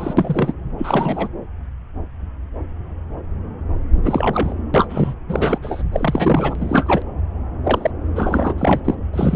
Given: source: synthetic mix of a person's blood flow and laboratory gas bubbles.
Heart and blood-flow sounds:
Doppler ultrasound of blood flow; subclavian vein
0.00-0.14 s: bubbles
0.17-0.53 s: bubbles
0.78-1.29 s: bubbles
4.03-4.54 s: bubbles
4.74-5.14 s: bubbles
5.28-5.58 s: bubbles
5.62-5.83 s: bubbles
5.92-7.02 s: bubbles
7.64-7.91 s: bubbles
8.16-8.54 s: bubbles
8.58-8.80 s: bubbles
8.85-8.95 s: bubbles
9.13-9.36 s: bubbles
From the record:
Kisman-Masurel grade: 233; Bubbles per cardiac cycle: several, 3 to 8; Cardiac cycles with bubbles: 50 to 99%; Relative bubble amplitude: loud (0.450 to 0.775); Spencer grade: 3 (all of the cardiac periods contain showers or single bubble signals, but not dominating or overriding the cardiac motion signals); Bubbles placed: anywhere in the cardiac cycle

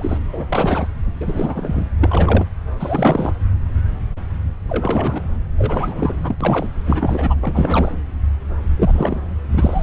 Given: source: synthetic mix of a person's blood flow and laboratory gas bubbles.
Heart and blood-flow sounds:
Doppler ultrasound of blood flow; subclavian vein
0.00-0.18 s: bubbles
0.33-0.46 s: bubbles
0.48-0.88 s: bubbles
1.20-1.89 s: bubbles
2.01-2.48 s: bubbles
2.79-3.33 s: bubbles
4.69-5.26 s: bubbles
5.57-6.35 s: bubbles
6.40-6.69 s: bubbles
6.85-7.34 s: bubbles
7.42-7.96 s: bubbles
8.77-9.21 s: bubbles
9.52-9.83 s: bubbles
From the record:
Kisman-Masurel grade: 332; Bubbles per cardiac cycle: rolling drumbeat, 9 or more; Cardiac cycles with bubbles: 50 to 99%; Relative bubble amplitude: moderate (0.250 to 0.450); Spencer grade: 3 (all of the cardiac periods contain showers or single bubble signals, but not dominating or overriding the cardiac motion signals); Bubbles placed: anywhere in the cardiac cycle

